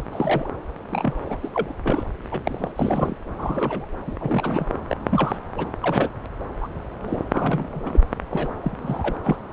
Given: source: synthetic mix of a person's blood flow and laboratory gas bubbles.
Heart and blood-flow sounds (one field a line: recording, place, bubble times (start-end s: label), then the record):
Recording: Doppler ultrasound of blood flow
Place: subclavian vein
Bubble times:
0.00-0.04 s: bubbles
0.11-0.49 s: bubbles
0.91-1.38 s: bubbles
1.43-1.51 s: bubbles
1.54-1.73 s: bubbles
1.83-2.10 s: bubbles
2.31-2.40 s: bubbles
2.44-2.71 s: bubbles
2.76-3.15 s: bubbles
3.33-3.88 s: bubbles
4.07-4.15 s: bubbles
4.20-4.67 s: bubbles
4.88-4.97 s: bubbles
5.09-5.38 s: bubbles
5.58-5.66 s: bubbles
5.83-6.09 s: bubbles
6.61-6.68 s: bubbles
7.01-7.20 s: bubbles
7.33-7.83 s: bubbles
7.85-7.99 s: bubbles
8.30-8.49 s: bubbles
8.62-9.18 s: bubbles
9.23-9.36 s: bubbles
From the record:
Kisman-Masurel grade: 242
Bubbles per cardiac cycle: several, 3 to 8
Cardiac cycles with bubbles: 100%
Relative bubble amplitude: moderate (0.250 to 0.450)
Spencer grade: 3 (all of the cardiac periods contain showers or single bubble signals, but not dominating or overriding the cardiac motion signals)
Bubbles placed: anywhere in the cardiac cycle